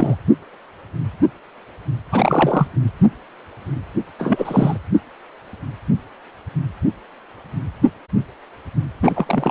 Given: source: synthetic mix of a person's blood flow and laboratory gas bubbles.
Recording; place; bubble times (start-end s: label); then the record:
Doppler ultrasound of blood flow; precordium
0.00-0.15 s: bubbles
2.11-2.67 s: bubbles
4.19-4.78 s: bubbles
9.03-9.50 s: bubbles
From the record:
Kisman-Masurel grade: 223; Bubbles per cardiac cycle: several, 3 to 8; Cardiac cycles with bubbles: 10 to 50%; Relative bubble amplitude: loud (0.450 to 0.775); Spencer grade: 2 (many but less than half of the cardiac periods contain bubble signals, singularly or in groups); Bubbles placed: only in the low amplitude regions of the cardiac cycle